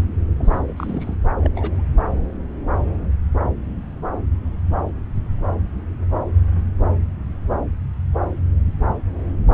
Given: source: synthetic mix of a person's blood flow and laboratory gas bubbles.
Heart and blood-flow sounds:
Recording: Doppler ultrasound of blood flow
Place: subclavian vein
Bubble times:
0.36-0.60 s: bubbles
0.67-0.73 s: bubbles
0.77-1.15 s: bubbles
1.41-1.51 s: bubbles
1.56-1.82 s: bubbles
From the record:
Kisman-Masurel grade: 221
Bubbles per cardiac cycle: several, 3 to 8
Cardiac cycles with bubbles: 10 to 50%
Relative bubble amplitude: barely perceptible (0.100 to 0.250)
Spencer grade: 2 (many but less than half of the cardiac periods contain bubble signals, singularly or in groups)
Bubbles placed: anywhere in the cardiac cycle

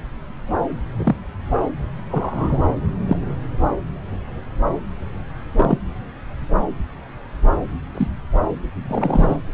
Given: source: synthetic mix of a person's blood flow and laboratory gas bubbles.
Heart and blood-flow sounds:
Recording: Doppler ultrasound of blood flow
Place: subclavian vein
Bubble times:
0.97-1.16 s: bubbles
2.11-2.60 s: bubbles
3.08-3.17 s: bubbles
5.55-5.78 s: bubbles
7.94-8.08 s: bubbles
8.88-9.37 s: bubbles
From the record:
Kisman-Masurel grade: 122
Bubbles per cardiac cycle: 1 to 2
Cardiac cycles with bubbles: 10 to 50%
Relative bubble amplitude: moderate (0.250 to 0.450)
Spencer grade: 2 (many but less than half of the cardiac periods contain bubble signals, singularly or in groups)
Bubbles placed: anywhere in the cardiac cycle

